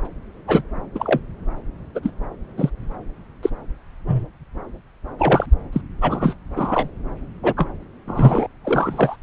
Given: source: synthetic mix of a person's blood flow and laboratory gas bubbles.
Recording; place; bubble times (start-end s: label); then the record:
Doppler ultrasound of blood flow; subclavian vein
0.47-0.62 s: bubbles
0.94-1.19 s: bubbles
1.95-2.00 s: bubbles
2.02-2.11 s: bubbles
2.58-2.70 s: bubbles
3.43-3.50 s: bubbles
4.07-4.26 s: bubbles
5.18-5.46 s: bubbles
5.72-5.81 s: bubbles
6.01-6.35 s: bubbles
6.55-6.91 s: bubbles
7.42-7.53 s: bubbles
7.56-7.67 s: bubbles
8.07-8.47 s: bubbles
8.64-9.16 s: bubbles
From the record:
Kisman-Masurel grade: 243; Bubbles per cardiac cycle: several, 3 to 8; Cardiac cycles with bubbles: 100%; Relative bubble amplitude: loud (0.450 to 0.775); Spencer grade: 3 (all of the cardiac periods contain showers or single bubble signals, but not dominating or overriding the cardiac motion signals); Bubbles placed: anywhere in the cardiac cycle